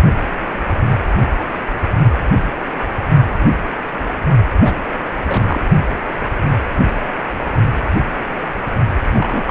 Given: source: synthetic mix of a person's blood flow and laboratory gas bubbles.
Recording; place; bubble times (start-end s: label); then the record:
Doppler ultrasound of blood flow; precordium
4.61-4.81 s: bubbles
5.25-5.65 s: bubbles
9.09-9.44 s: bubbles
9.46-9.51 s: bubbles
From the record:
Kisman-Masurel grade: 222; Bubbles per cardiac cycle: several, 3 to 8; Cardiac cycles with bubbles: 10 to 50%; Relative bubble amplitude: moderate (0.250 to 0.450); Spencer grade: 2 (many but less than half of the cardiac periods contain bubble signals, singularly or in groups); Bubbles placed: only in the low amplitude regions of the cardiac cycle